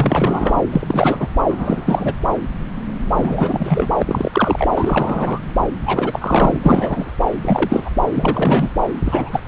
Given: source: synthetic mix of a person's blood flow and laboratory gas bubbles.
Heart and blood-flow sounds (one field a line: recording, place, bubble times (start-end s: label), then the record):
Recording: Doppler ultrasound of blood flow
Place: subclavian vein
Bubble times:
0.00-0.62 s: bubbles
0.71-1.27 s: bubbles
1.47-2.13 s: bubbles
3.17-3.88 s: bubbles
3.98-4.67 s: bubbles
4.75-5.40 s: bubbles
5.86-6.58 s: bubbles
6.62-7.12 s: bubbles
7.42-7.91 s: bubbles
8.13-8.70 s: bubbles
9.04-9.43 s: bubbles
From the record:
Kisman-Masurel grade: 333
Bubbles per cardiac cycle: rolling drumbeat, 9 or more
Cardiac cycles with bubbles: 50 to 99%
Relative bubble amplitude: loud (0.450 to 0.775)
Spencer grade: 3 (all of the cardiac periods contain showers or single bubble signals, but not dominating or overriding the cardiac motion signals)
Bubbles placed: anywhere in the cardiac cycle